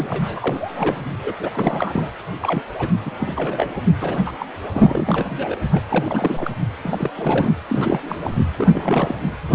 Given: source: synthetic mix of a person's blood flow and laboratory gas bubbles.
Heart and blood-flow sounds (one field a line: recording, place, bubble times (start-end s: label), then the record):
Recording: Doppler ultrasound of blood flow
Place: precordium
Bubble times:
0.00-1.10 s: bubbles
1.24-1.33 s: bubbles
1.40-1.50 s: bubbles
1.53-2.10 s: bubbles
2.42-2.62 s: bubbles
2.79-2.88 s: bubbles
3.05-3.11 s: bubbles
3.20-3.69 s: bubbles
3.77-3.83 s: bubbles
4.01-4.32 s: bubbles
4.39-4.46 s: bubbles
4.74-5.55 s: bubbles
5.71-5.80 s: bubbles
5.89-6.50 s: bubbles
6.82-7.11 s: bubbles
7.17-7.54 s: bubbles
7.70-8.00 s: bubbles
8.05-8.31 s: bubbles
8.56-9.14 s: bubbles
From the record:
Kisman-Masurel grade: 342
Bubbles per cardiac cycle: rolling drumbeat, 9 or more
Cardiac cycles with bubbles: 100%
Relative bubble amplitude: moderate (0.250 to 0.450)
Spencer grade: 3 (all of the cardiac periods contain showers or single bubble signals, but not dominating or overriding the cardiac motion signals)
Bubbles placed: anywhere in the cardiac cycle